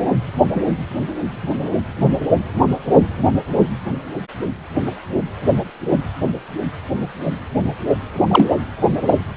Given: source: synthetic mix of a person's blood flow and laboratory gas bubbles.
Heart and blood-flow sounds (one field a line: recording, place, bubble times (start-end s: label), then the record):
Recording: Doppler ultrasound of blood flow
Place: precordium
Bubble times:
0.54-0.60 s: bubbles
8.28-8.48 s: bubbles
9.07-9.16 s: bubbles
From the record:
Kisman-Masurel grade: 123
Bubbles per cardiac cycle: 1 to 2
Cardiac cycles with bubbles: 10 to 50%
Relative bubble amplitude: loud (0.450 to 0.775)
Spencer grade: 2 (many but less than half of the cardiac periods contain bubble signals, singularly or in groups)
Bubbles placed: anywhere in the cardiac cycle